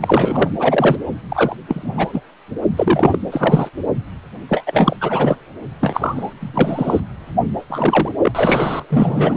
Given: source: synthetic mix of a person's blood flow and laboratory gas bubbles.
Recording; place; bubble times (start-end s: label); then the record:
Doppler ultrasound of blood flow; precordium
0.01-0.51 s: bubbles
0.59-0.98 s: bubbles
1.29-1.56 s: bubbles
1.68-2.21 s: bubbles
2.77-3.19 s: bubbles
3.31-3.69 s: bubbles
4.49-4.96 s: bubbles
5.01-5.36 s: bubbles
5.80-6.33 s: bubbles
6.40-7.00 s: bubbles
7.69-8.09 s: bubbles
8.21-8.31 s: bubbles
8.34-8.84 s: bubbles
8.90-9.37 s: bubbles
From the record:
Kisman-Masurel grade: 233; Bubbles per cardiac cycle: several, 3 to 8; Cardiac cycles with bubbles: 50 to 99%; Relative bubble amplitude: loud (0.450 to 0.775); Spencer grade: 3 (all of the cardiac periods contain showers or single bubble signals, but not dominating or overriding the cardiac motion signals); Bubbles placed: anywhere in the cardiac cycle